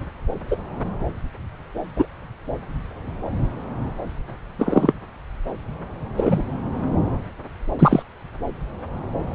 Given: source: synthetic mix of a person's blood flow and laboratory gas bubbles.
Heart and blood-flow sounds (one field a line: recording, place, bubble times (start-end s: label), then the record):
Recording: Doppler ultrasound of blood flow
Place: subclavian vein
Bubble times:
0.51-0.56 s: bubbles
1.96-2.05 s: bubbles
4.58-4.92 s: bubbles
6.17-6.42 s: bubbles
7.79-8.02 s: bubbles
From the record:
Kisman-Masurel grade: 123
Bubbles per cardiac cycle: 1 to 2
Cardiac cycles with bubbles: 10 to 50%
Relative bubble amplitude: loud (0.450 to 0.775)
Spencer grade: 2 (many but less than half of the cardiac periods contain bubble signals, singularly or in groups)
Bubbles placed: anywhere in the cardiac cycle